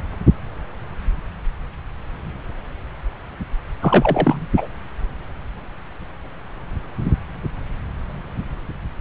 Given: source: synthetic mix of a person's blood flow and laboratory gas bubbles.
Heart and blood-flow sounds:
Doppler ultrasound of blood flow; subclavian vein
3.81-4.46 s: bubbles
4.56-4.67 s: bubbles
From the record:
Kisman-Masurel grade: 213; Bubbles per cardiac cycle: several, 3 to 8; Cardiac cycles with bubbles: 1 to 10%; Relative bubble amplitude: loud (0.450 to 0.775); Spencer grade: 1 (occasional bubble signal discernible with the cardiac motion signal, with majority of cardiac periods free of bubbles); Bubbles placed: anywhere in the cardiac cycle

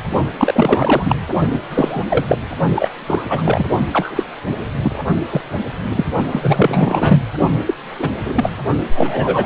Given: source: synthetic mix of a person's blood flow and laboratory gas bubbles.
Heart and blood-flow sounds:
Doppler ultrasound of blood flow; precordium
0.00-0.04 s: bubbles
0.38-1.15 s: bubbles
1.52-1.59 s: bubbles
1.69-2.04 s: bubbles
2.09-2.25 s: bubbles
2.28-2.38 s: bubbles
2.75-2.88 s: bubbles
3.07-3.69 s: bubbles
3.93-4.24 s: bubbles
4.47-4.53 s: bubbles
4.82-5.04 s: bubbles
5.30-5.41 s: bubbles
5.91-6.06 s: bubbles
6.26-7.20 s: bubbles
7.66-7.75 s: bubbles
7.99-8.08 s: bubbles
8.25-8.50 s: bubbles
8.95-9.45 s: bubbles
From the record:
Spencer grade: 3 (all of the cardiac periods contain showers or single bubble signals, but not dominating or overriding the cardiac motion signals); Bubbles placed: only in the low amplitude regions of the cardiac cycle

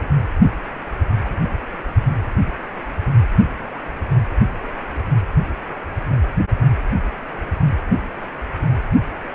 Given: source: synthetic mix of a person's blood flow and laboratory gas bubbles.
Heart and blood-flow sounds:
Doppler ultrasound of blood flow; precordium
1.25-1.35 s: bubbles
From the record:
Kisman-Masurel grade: 111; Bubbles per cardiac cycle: 1 to 2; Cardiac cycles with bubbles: 1 to 10%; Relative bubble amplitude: barely perceptible (0.100 to 0.250); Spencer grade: 1 (occasional bubble signal discernible with the cardiac motion signal, with majority of cardiac periods free of bubbles); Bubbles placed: only in the low amplitude regions of the cardiac cycle

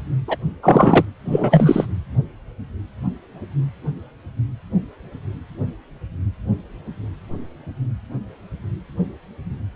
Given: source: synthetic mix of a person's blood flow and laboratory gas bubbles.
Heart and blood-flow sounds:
Doppler ultrasound of blood flow; precordium
0.28-0.36 s: bubbles
0.62-1.05 s: bubbles
1.25-1.87 s: bubbles
From the record:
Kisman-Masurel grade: 223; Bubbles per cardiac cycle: several, 3 to 8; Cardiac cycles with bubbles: 10 to 50%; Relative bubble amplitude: loud (0.450 to 0.775); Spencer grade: 2 (many but less than half of the cardiac periods contain bubble signals, singularly or in groups); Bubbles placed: anywhere in the cardiac cycle

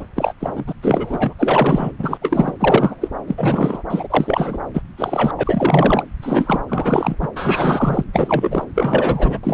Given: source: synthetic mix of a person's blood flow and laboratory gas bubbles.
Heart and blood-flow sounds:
Doppler ultrasound of blood flow; subclavian vein
0.00-0.05 s: bubbles
0.15-0.33 s: bubbles
0.40-0.73 s: bubbles
0.82-1.33 s: bubbles
1.39-1.92 s: bubbles
1.99-2.17 s: bubbles
2.21-2.53 s: bubbles
2.60-2.95 s: bubbles
3.01-3.08 s: bubbles
3.28-3.83 s: bubbles
3.90-4.08 s: bubbles
4.10-4.58 s: bubbles
4.74-4.82 s: bubbles
4.97-6.04 s: bubbles
6.21-6.62 s: bubbles
6.68-7.16 s: bubbles
7.21-7.28 s: bubbles
7.35-8.04 s: bubbles
8.13-8.65 s: bubbles
8.75-9.39 s: bubbles
9.43-9.54 s: bubbles
From the record:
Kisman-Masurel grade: 343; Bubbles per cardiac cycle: rolling drumbeat, 9 or more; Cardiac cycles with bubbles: 100%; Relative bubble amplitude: loud (0.450 to 0.775); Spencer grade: 3 (all of the cardiac periods contain showers or single bubble signals, but not dominating or overriding the cardiac motion signals); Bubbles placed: anywhere in the cardiac cycle

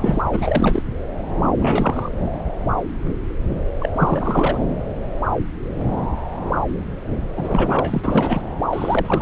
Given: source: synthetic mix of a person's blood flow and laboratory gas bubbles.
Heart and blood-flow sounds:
Doppler ultrasound of blood flow; subclavian vein
0.00-0.23 s: bubbles
0.32-0.83 s: bubbles
1.58-2.11 s: bubbles
3.79-3.89 s: bubbles
3.96-4.58 s: bubbles
7.37-8.42 s: bubbles
8.72-9.22 s: bubbles
From the record:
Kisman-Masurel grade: 332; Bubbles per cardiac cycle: rolling drumbeat, 9 or more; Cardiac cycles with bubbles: 50 to 99%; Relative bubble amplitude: moderate (0.250 to 0.450); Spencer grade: 3 (all of the cardiac periods contain showers or single bubble signals, but not dominating or overriding the cardiac motion signals); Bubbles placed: anywhere in the cardiac cycle

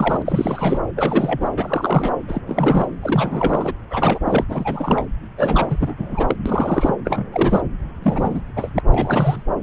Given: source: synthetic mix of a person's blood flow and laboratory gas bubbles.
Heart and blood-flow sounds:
Doppler ultrasound of blood flow; subclavian vein
0.00-0.22 s: bubbles
0.26-0.78 s: bubbles
0.97-1.48 s: bubbles
1.56-2.15 s: bubbles
2.27-2.42 s: bubbles
2.47-2.88 s: bubbles
3.02-3.73 s: bubbles
3.90-4.19 s: bubbles
4.26-4.44 s: bubbles
4.48-5.07 s: bubbles
5.38-5.77 s: bubbles
5.80-5.95 s: bubbles
5.98-6.36 s: bubbles
6.46-6.96 s: bubbles
7.05-7.24 s: bubbles
7.32-7.63 s: bubbles
8.02-8.41 s: bubbles
8.56-8.71 s: bubbles
8.76-8.80 s: bubbles
8.92-9.43 s: bubbles
From the record:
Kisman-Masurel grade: 342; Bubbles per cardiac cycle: rolling drumbeat, 9 or more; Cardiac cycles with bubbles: 100%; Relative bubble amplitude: moderate (0.250 to 0.450); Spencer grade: 3 (all of the cardiac periods contain showers or single bubble signals, but not dominating or overriding the cardiac motion signals); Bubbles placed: anywhere in the cardiac cycle

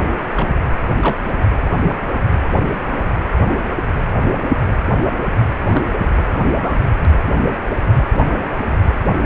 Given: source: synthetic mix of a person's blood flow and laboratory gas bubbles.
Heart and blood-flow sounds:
Doppler ultrasound of blood flow; precordium
0.34-0.51 s: bubbles
1.00-1.18 s: bubbles
2.29-2.35 s: bubbles
5.72-5.93 s: bubbles
6.56-6.97 s: bubbles
From the record:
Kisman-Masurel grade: 122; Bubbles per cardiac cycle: 1 to 2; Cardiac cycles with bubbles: 10 to 50%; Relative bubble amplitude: moderate (0.250 to 0.450); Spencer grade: 2 (many but less than half of the cardiac periods contain bubble signals, singularly or in groups); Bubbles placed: anywhere in the cardiac cycle

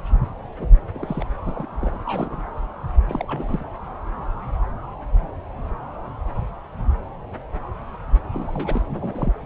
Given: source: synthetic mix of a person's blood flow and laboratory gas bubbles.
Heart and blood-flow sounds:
Doppler ultrasound of blood flow; subclavian vein
0.59-0.67 s: bubbles
0.94-1.24 s: bubbles
1.47-1.66 s: bubbles
1.81-1.98 s: bubbles
2.05-2.41 s: bubbles
3.08-3.64 s: bubbles
8.33-8.81 s: bubbles
8.89-9.34 s: bubbles
From the record:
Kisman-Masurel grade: 221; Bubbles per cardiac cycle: several, 3 to 8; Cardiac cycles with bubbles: 10 to 50%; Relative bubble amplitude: barely perceptible (0.100 to 0.250); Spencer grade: 2 (many but less than half of the cardiac periods contain bubble signals, singularly or in groups); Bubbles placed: anywhere in the cardiac cycle

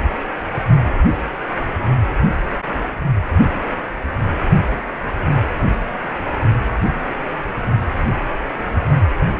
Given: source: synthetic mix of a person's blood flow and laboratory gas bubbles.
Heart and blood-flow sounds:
Doppler ultrasound of blood flow; precordium
9.30-9.39 s: bubbles
From the record:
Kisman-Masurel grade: 122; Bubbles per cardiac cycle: 1 to 2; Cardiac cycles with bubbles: 10 to 50%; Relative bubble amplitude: moderate (0.250 to 0.450); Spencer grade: 2 (many but less than half of the cardiac periods contain bubble signals, singularly or in groups); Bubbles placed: only in the low amplitude regions of the cardiac cycle

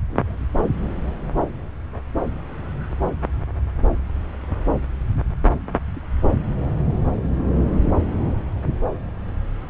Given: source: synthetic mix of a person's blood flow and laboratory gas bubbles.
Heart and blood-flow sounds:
Doppler ultrasound of blood flow; subclavian vein
0.09-0.38 s: bubbles
From the record:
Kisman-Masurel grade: 111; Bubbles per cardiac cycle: 1 to 2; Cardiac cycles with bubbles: 1 to 10%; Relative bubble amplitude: barely perceptible (0.100 to 0.250); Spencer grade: 1 (occasional bubble signal discernible with the cardiac motion signal, with majority of cardiac periods free of bubbles); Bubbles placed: anywhere in the cardiac cycle

